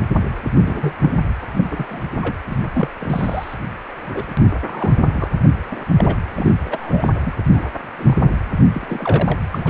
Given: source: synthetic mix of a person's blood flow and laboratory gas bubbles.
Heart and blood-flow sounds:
Doppler ultrasound of blood flow; precordium
0.55-0.94 s: bubbles
1.02-1.15 s: bubbles
1.56-1.65 s: bubbles
1.70-2.03 s: bubbles
2.16-2.35 s: bubbles
2.50-2.56 s: bubbles
2.75-2.89 s: bubbles
3.00-3.55 s: bubbles
4.13-4.24 s: bubbles
4.27-4.37 s: bubbles
4.67-4.93 s: bubbles
5.13-5.28 s: bubbles
5.72-5.86 s: bubbles
5.98-6.17 s: bubbles
6.34-6.52 s: bubbles
6.64-7.08 s: bubbles
7.25-7.32 s: bubbles
7.54-7.66 s: bubbles
7.97-8.15 s: bubbles
8.20-8.31 s: bubbles
8.73-9.38 s: bubbles
9.51-9.70 s: bubbles
From the record:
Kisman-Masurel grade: 232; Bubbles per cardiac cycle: several, 3 to 8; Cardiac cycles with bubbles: 50 to 99%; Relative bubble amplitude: moderate (0.250 to 0.450); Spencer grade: 3 (all of the cardiac periods contain showers or single bubble signals, but not dominating or overriding the cardiac motion signals); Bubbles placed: anywhere in the cardiac cycle

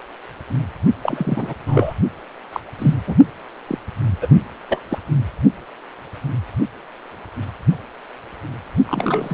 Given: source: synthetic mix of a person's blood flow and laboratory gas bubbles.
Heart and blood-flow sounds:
Doppler ultrasound of blood flow; precordium
1.04-1.54 s: bubbles
1.67-1.94 s: bubbles
2.52-2.60 s: bubbles
2.78-2.94 s: bubbles
3.06-3.15 s: bubbles
3.67-3.78 s: bubbles
4.22-4.27 s: bubbles
4.69-4.81 s: bubbles
4.89-4.99 s: bubbles
8.86-9.34 s: bubbles
From the record:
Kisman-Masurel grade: 222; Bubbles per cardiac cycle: several, 3 to 8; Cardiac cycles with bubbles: 10 to 50%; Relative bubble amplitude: moderate (0.250 to 0.450); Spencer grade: 2 (many but less than half of the cardiac periods contain bubble signals, singularly or in groups); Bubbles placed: only in the low amplitude regions of the cardiac cycle

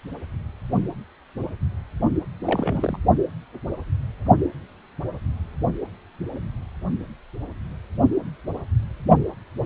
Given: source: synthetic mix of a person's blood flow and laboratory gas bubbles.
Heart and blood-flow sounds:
Doppler ultrasound of blood flow; precordium
2.45-2.97 s: bubbles
From the record:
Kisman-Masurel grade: 211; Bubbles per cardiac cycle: several, 3 to 8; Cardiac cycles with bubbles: 1 to 10%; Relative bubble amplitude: barely perceptible (0.100 to 0.250); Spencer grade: 1 (occasional bubble signal discernible with the cardiac motion signal, with majority of cardiac periods free of bubbles); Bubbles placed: only in the low amplitude regions of the cardiac cycle

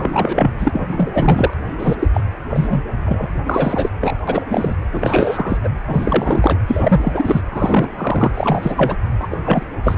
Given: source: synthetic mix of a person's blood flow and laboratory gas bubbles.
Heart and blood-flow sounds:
Doppler ultrasound of blood flow; precordium
0.00-0.50 s: bubbles
0.58-0.70 s: bubbles
0.72-1.53 s: bubbles
1.79-1.97 s: bubbles
1.99-2.08 s: bubbles
2.13-2.22 s: bubbles
2.50-2.83 s: bubbles
3.06-3.28 s: bubbles
3.46-3.90 s: bubbles
4.00-4.17 s: bubbles
4.28-4.75 s: bubbles
4.91-5.58 s: bubbles
5.63-5.69 s: bubbles
5.87-6.58 s: bubbles
6.67-7.41 s: bubbles
7.50-7.88 s: bubbles
7.97-8.31 s: bubbles
8.34-8.96 s: bubbles
9.20-9.28 s: bubbles
9.31-9.37 s: bubbles
9.43-9.63 s: bubbles
9.84-9.98 s: bubbles
From the record:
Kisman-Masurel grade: 343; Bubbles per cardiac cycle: rolling drumbeat, 9 or more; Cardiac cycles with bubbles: 100%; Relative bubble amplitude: loud (0.450 to 0.775); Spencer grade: 3 (all of the cardiac periods contain showers or single bubble signals, but not dominating or overriding the cardiac motion signals); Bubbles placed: anywhere in the cardiac cycle

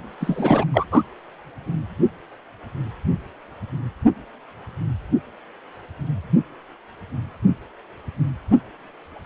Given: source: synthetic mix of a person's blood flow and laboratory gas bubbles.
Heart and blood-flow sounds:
Doppler ultrasound of blood flow; precordium
0.20-0.64 s: bubbles
0.74-0.84 s: bubbles
0.92-1.02 s: bubbles
From the record:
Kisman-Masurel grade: 212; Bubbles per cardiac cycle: several, 3 to 8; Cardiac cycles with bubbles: 1 to 10%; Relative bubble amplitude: moderate (0.250 to 0.450); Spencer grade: 1 (occasional bubble signal discernible with the cardiac motion signal, with majority of cardiac periods free of bubbles); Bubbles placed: anywhere in the cardiac cycle

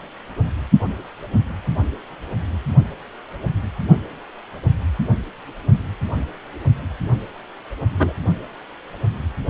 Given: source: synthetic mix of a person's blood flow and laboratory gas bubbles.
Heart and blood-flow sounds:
Doppler ultrasound of blood flow; precordium
7.98-8.13 s: bubbles
From the record:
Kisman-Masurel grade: 113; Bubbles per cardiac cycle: 1 to 2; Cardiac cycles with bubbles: 1 to 10%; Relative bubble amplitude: loud (0.450 to 0.775); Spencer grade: 1 (occasional bubble signal discernible with the cardiac motion signal, with majority of cardiac periods free of bubbles); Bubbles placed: only in the low amplitude regions of the cardiac cycle

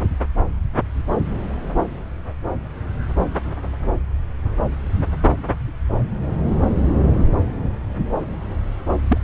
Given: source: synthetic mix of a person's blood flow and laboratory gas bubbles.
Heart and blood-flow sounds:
Doppler ultrasound of blood flow; subclavian vein
9.08-9.18 s: bubbles
From the record:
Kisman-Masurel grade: 112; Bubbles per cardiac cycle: 1 to 2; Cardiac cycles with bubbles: 1 to 10%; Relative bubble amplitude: moderate (0.250 to 0.450); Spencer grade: 1 (occasional bubble signal discernible with the cardiac motion signal, with majority of cardiac periods free of bubbles); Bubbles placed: anywhere in the cardiac cycle

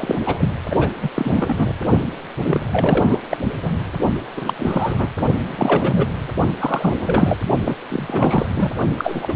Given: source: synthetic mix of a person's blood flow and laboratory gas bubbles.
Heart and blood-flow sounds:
Doppler ultrasound of blood flow; precordium
0.00-0.15 s: bubbles
0.26-0.51 s: bubbles
0.70-0.76 s: bubbles
0.79-0.90 s: bubbles
1.02-1.09 s: bubbles
1.13-1.73 s: bubbles
2.44-2.66 s: bubbles
2.72-3.19 s: bubbles
3.29-3.37 s: bubbles
3.62-3.71 s: bubbles
4.37-4.54 s: bubbles
4.59-5.07 s: bubbles
5.48-6.13 s: bubbles
6.59-7.37 s: bubbles
7.64-7.75 s: bubbles
7.89-8.46 s: bubbles
8.55-8.72 s: bubbles
8.97-9.34 s: bubbles
From the record:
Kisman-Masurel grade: 343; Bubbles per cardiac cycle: rolling drumbeat, 9 or more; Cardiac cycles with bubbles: 100%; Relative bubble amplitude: loud (0.450 to 0.775); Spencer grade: 3 (all of the cardiac periods contain showers or single bubble signals, but not dominating or overriding the cardiac motion signals); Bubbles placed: only in the low amplitude regions of the cardiac cycle

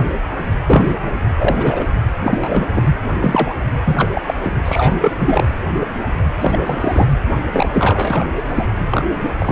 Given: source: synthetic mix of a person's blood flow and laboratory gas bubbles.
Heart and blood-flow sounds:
Doppler ultrasound of blood flow; precordium
0.66-0.93 s: bubbles
1.40-1.85 s: bubbles
2.24-2.67 s: bubbles
2.73-2.88 s: bubbles
3.22-3.55 s: bubbles
3.84-4.21 s: bubbles
4.27-4.34 s: bubbles
4.43-4.51 s: bubbles
4.65-4.96 s: bubbles
5.01-5.46 s: bubbles
6.41-7.05 s: bubbles
7.52-8.24 s: bubbles
8.36-8.43 s: bubbles
8.48-8.66 s: bubbles
8.90-9.05 s: bubbles
9.39-9.52 s: bubbles
From the record:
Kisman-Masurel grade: 233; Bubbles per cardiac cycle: several, 3 to 8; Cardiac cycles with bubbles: 50 to 99%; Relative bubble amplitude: loud (0.450 to 0.775); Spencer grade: 3 (all of the cardiac periods contain showers or single bubble signals, but not dominating or overriding the cardiac motion signals); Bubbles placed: anywhere in the cardiac cycle

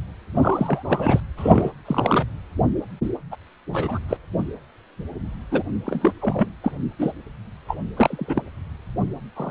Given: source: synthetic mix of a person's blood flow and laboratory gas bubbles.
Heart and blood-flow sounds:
Doppler ultrasound of blood flow; precordium
0.35-1.20 s: bubbles
1.37-1.70 s: bubbles
1.85-2.26 s: bubbles
3.31-3.36 s: bubbles
3.72-3.99 s: bubbles
4.08-4.17 s: bubbles
5.51-5.63 s: bubbles
5.86-6.12 s: bubbles
6.21-6.48 s: bubbles
6.63-6.71 s: bubbles
6.99-7.12 s: bubbles
7.68-7.77 s: bubbles
7.97-8.42 s: bubbles
9.36-9.51 s: bubbles
From the record:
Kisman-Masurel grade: 232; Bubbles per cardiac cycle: several, 3 to 8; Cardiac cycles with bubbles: 50 to 99%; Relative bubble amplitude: moderate (0.250 to 0.450); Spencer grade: 3 (all of the cardiac periods contain showers or single bubble signals, but not dominating or overriding the cardiac motion signals); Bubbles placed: anywhere in the cardiac cycle

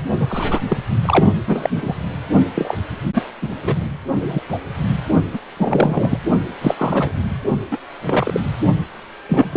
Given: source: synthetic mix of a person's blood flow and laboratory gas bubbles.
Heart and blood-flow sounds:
Doppler ultrasound of blood flow; precordium
0.19-0.60 s: bubbles
0.69-0.78 s: bubbles
1.05-1.32 s: bubbles
1.46-1.69 s: bubbles
1.75-1.94 s: bubbles
2.54-2.77 s: bubbles
3.13-3.23 s: bubbles
3.42-3.49 s: bubbles
3.63-3.76 s: bubbles
4.16-4.40 s: bubbles
4.48-4.58 s: bubbles
5.33-5.40 s: bubbles
5.57-6.18 s: bubbles
6.61-7.11 s: bubbles
7.70-7.79 s: bubbles
8.06-8.40 s: bubbles
9.29-9.56 s: bubbles
From the record:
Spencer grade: 3 (all of the cardiac periods contain showers or single bubble signals, but not dominating or overriding the cardiac motion signals); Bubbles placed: only in the low amplitude regions of the cardiac cycle

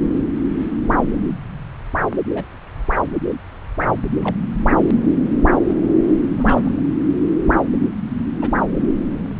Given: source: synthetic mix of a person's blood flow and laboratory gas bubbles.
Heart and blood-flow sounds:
Doppler ultrasound of blood flow; subclavian vein
2.34-2.44 s: bubbles
4.21-4.36 s: bubbles
6.35-6.83 s: bubbles
8.41-8.49 s: bubbles
From the record:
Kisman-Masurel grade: 121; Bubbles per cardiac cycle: 1 to 2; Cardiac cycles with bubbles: 10 to 50%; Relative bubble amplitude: barely perceptible (0.100 to 0.250); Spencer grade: 2 (many but less than half of the cardiac periods contain bubble signals, singularly or in groups); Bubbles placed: anywhere in the cardiac cycle

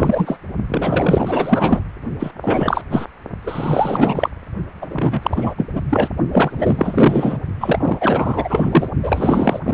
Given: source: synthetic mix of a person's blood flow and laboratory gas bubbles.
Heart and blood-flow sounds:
Doppler ultrasound of blood flow; precordium
0.00-0.38 s: bubbles
0.70-1.81 s: bubbles
2.19-2.31 s: bubbles
2.42-2.82 s: bubbles
2.90-3.07 s: bubbles
3.42-4.30 s: bubbles
4.82-4.87 s: bubbles
4.89-5.66 s: bubbles
5.73-5.86 s: bubbles
5.89-6.08 s: bubbles
6.33-7.38 s: bubbles
7.60-8.88 s: bubbles
9.03-9.60 s: bubbles
9.64-9.74 s: bubbles
From the record:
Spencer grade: 4 (maximum detectable bubble signal sounding continuously throughout systole and diastole of every cardiac period, and overriding the amplitude of the normal cardiac signals); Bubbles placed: only in the low amplitude regions of the cardiac cycle

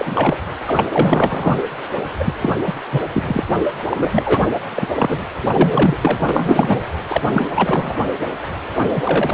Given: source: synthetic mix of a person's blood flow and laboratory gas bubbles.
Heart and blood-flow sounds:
Doppler ultrasound of blood flow; precordium
0.00-0.36 s: bubbles
0.66-0.85 s: bubbles
0.90-1.55 s: bubbles
2.19-2.33 s: bubbles
2.40-2.56 s: bubbles
2.67-2.73 s: bubbles
2.92-3.02 s: bubbles
3.14-3.23 s: bubbles
3.27-3.44 s: bubbles
3.90-4.51 s: bubbles
4.70-4.87 s: bubbles
4.96-5.26 s: bubbles
5.43-5.97 s: bubbles
6.01-6.83 s: bubbles
7.08-7.22 s: bubbles
7.33-8.04 s: bubbles
8.60-9.34 s: bubbles
From the record:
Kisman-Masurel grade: 343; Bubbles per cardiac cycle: rolling drumbeat, 9 or more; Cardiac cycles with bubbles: 100%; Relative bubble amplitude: loud (0.450 to 0.775); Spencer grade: 3 (all of the cardiac periods contain showers or single bubble signals, but not dominating or overriding the cardiac motion signals); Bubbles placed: anywhere in the cardiac cycle

